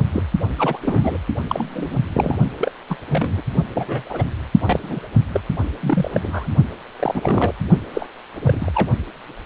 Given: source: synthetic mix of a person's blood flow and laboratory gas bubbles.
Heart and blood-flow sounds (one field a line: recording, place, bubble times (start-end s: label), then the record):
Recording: Doppler ultrasound of blood flow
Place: precordium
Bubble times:
0.13-0.24 s: bubbles
0.58-0.78 s: bubbles
0.82-1.18 s: bubbles
1.49-1.99 s: bubbles
2.14-2.38 s: bubbles
2.58-2.72 s: bubbles
2.89-2.97 s: bubbles
3.08-3.42 s: bubbles
3.74-4.28 s: bubbles
4.61-5.00 s: bubbles
5.33-5.41 s: bubbles
5.80-6.11 s: bubbles
6.13-6.49 s: bubbles
6.99-7.53 s: bubbles
7.93-8.06 s: bubbles
8.35-8.71 s: bubbles
8.74-8.92 s: bubbles
From the record:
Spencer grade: 3 (all of the cardiac periods contain showers or single bubble signals, but not dominating or overriding the cardiac motion signals)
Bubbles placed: only in the low amplitude regions of the cardiac cycle